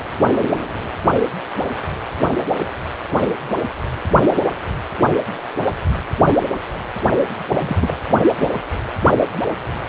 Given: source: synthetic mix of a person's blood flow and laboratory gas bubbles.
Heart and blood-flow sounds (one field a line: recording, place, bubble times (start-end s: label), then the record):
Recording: Doppler ultrasound of blood flow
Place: precordium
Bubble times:
7.56-7.97 s: bubbles
8.29-8.33 s: bubbles
8.38-8.53 s: bubbles
From the record:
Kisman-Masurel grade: 212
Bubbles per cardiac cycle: several, 3 to 8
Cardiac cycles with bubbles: 1 to 10%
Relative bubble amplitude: moderate (0.250 to 0.450)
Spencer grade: 1 (occasional bubble signal discernible with the cardiac motion signal, with majority of cardiac periods free of bubbles)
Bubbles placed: anywhere in the cardiac cycle